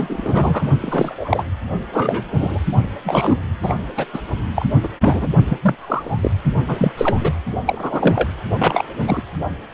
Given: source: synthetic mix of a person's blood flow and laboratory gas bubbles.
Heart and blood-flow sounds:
Doppler ultrasound of blood flow; precordium
0.00-0.65 s: bubbles
0.82-1.44 s: bubbles
1.93-2.25 s: bubbles
2.32-2.59 s: bubbles
3.04-3.37 s: bubbles
3.62-3.74 s: bubbles
3.97-4.05 s: bubbles
4.13-4.22 s: bubbles
4.56-4.66 s: bubbles
4.83-4.89 s: bubbles
5.01-5.27 s: bubbles
5.49-5.58 s: bubbles
5.62-5.75 s: bubbles
5.78-6.31 s: bubbles
6.68-6.92 s: bubbles
6.97-7.33 s: bubbles
7.67-8.28 s: bubbles
8.60-8.83 s: bubbles
9.00-9.22 s: bubbles
From the record:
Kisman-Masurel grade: 243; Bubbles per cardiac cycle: several, 3 to 8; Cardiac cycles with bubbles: 100%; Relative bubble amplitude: loud (0.450 to 0.775); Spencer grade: 3 (all of the cardiac periods contain showers or single bubble signals, but not dominating or overriding the cardiac motion signals); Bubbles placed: only in the low amplitude regions of the cardiac cycle

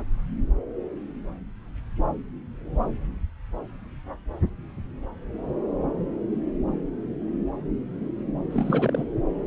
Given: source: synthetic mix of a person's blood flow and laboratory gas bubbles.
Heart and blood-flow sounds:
Doppler ultrasound of blood flow; subclavian vein
8.50-9.04 s: bubbles
From the record:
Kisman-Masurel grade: 211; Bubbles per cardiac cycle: several, 3 to 8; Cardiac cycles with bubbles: 1 to 10%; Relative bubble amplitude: barely perceptible (0.100 to 0.250); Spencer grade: 1 (occasional bubble signal discernible with the cardiac motion signal, with majority of cardiac periods free of bubbles); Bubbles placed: anywhere in the cardiac cycle

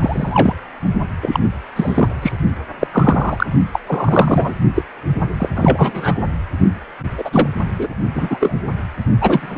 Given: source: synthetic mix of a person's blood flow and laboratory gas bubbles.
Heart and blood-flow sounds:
Doppler ultrasound of blood flow; precordium
0.00-0.54 s: bubbles
1.22-1.40 s: bubbles
1.75-2.08 s: bubbles
2.21-2.32 s: bubbles
2.79-2.87 s: bubbles
2.92-3.46 s: bubbles
3.73-3.79 s: bubbles
3.86-4.54 s: bubbles
4.74-4.83 s: bubbles
5.40-5.49 s: bubbles
5.55-6.15 s: bubbles
7.18-7.48 s: bubbles
7.79-7.88 s: bubbles
8.14-8.61 s: bubbles
9.21-9.58 s: bubbles
From the record:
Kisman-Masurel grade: 243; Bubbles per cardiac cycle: several, 3 to 8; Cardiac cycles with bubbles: 100%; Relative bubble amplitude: loud (0.450 to 0.775); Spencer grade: 3 (all of the cardiac periods contain showers or single bubble signals, but not dominating or overriding the cardiac motion signals); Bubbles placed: only in the low amplitude regions of the cardiac cycle

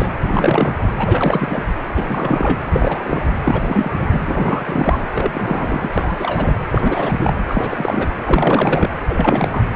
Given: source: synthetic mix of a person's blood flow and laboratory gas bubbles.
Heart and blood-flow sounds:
Doppler ultrasound of blood flow; precordium
0.00-0.12 s: bubbles
0.22-0.76 s: bubbles
0.97-1.64 s: bubbles
1.95-2.58 s: bubbles
2.66-3.27 s: bubbles
3.44-4.21 s: bubbles
4.27-5.03 s: bubbles
5.14-5.89 s: bubbles
5.92-6.55 s: bubbles
6.71-7.34 s: bubbles
7.48-8.16 s: bubbles
8.25-8.90 s: bubbles
9.07-9.62 s: bubbles
From the record:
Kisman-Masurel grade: 343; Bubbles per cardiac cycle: rolling drumbeat, 9 or more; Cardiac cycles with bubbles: 100%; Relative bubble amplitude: loud (0.450 to 0.775); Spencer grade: 3 (all of the cardiac periods contain showers or single bubble signals, but not dominating or overriding the cardiac motion signals); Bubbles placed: anywhere in the cardiac cycle

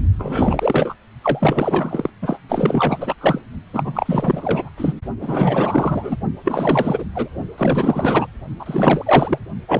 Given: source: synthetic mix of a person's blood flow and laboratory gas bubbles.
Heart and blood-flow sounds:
Doppler ultrasound of blood flow; precordium
0.18-0.94 s: bubbles
1.21-2.10 s: bubbles
2.22-2.40 s: bubbles
2.49-3.42 s: bubbles
3.73-4.69 s: bubbles
4.77-4.94 s: bubbles
5.21-6.17 s: bubbles
6.44-7.05 s: bubbles
7.14-7.29 s: bubbles
7.57-8.27 s: bubbles
8.59-9.38 s: bubbles
9.67-9.80 s: bubbles
From the record:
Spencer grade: 4 (maximum detectable bubble signal sounding continuously throughout systole and diastole of every cardiac period, and overriding the amplitude of the normal cardiac signals); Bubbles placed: only in the low amplitude regions of the cardiac cycle

